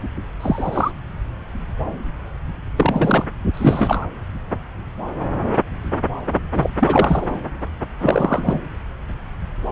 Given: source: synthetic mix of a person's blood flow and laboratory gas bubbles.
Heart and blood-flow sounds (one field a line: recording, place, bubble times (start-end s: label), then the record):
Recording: Doppler ultrasound of blood flow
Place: subclavian vein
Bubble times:
0.40-0.92 s: bubbles
2.76-3.27 s: bubbles
3.54-4.07 s: bubbles
6.54-6.70 s: bubbles
6.80-7.40 s: bubbles
8.00-8.60 s: bubbles
From the record:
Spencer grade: 3 (all of the cardiac periods contain showers or single bubble signals, but not dominating or overriding the cardiac motion signals)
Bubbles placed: anywhere in the cardiac cycle